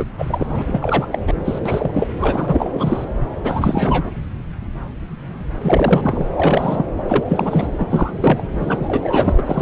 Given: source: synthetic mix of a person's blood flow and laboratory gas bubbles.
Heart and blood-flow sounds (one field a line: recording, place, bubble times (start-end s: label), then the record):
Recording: Doppler ultrasound of blood flow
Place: subclavian vein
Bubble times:
0.00-0.05 s: bubbles
0.18-0.62 s: bubbles
0.67-1.08 s: bubbles
1.12-1.19 s: bubbles
1.27-1.35 s: bubbles
1.44-1.60 s: bubbles
1.65-2.07 s: bubbles
2.17-2.70 s: bubbles
2.73-3.04 s: bubbles
3.44-4.10 s: bubbles
5.62-6.26 s: bubbles
6.36-6.86 s: bubbles
6.97-7.03 s: bubbles
7.08-7.67 s: bubbles
7.78-7.87 s: bubbles
7.90-8.45 s: bubbles
8.60-9.62 s: bubbles
From the record:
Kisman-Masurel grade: 333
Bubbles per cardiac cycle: rolling drumbeat, 9 or more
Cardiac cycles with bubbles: 50 to 99%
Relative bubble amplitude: loud (0.450 to 0.775)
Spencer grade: 3 (all of the cardiac periods contain showers or single bubble signals, but not dominating or overriding the cardiac motion signals)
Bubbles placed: anywhere in the cardiac cycle